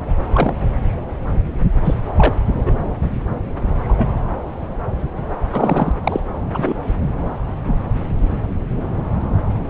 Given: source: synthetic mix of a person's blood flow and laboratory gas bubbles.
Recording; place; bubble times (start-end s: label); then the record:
Doppler ultrasound of blood flow; subclavian vein
0.34-0.76 s: bubbles
1.84-1.96 s: bubbles
2.16-2.33 s: bubbles
2.66-2.72 s: bubbles
3.81-4.13 s: bubbles
5.52-5.92 s: bubbles
6.04-6.20 s: bubbles
6.53-6.74 s: bubbles
7.67-7.75 s: bubbles
From the record:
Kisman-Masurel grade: 123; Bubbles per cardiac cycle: 1 to 2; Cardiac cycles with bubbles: 10 to 50%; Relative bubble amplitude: loud (0.450 to 0.775); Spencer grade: 2 (many but less than half of the cardiac periods contain bubble signals, singularly or in groups); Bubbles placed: anywhere in the cardiac cycle